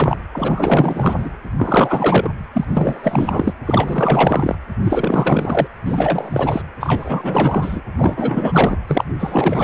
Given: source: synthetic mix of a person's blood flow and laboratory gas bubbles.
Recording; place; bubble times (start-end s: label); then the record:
Doppler ultrasound of blood flow; precordium
0.00-0.16 s: bubbles
0.32-1.29 s: bubbles
1.57-2.29 s: bubbles
2.53-3.53 s: bubbles
3.65-4.56 s: bubbles
4.82-5.67 s: bubbles
5.86-6.62 s: bubbles
6.80-7.81 s: bubbles
7.98-8.77 s: bubbles
8.87-9.04 s: bubbles
9.19-9.64 s: bubbles
From the record:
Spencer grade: 4 (maximum detectable bubble signal sounding continuously throughout systole and diastole of every cardiac period, and overriding the amplitude of the normal cardiac signals); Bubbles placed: anywhere in the cardiac cycle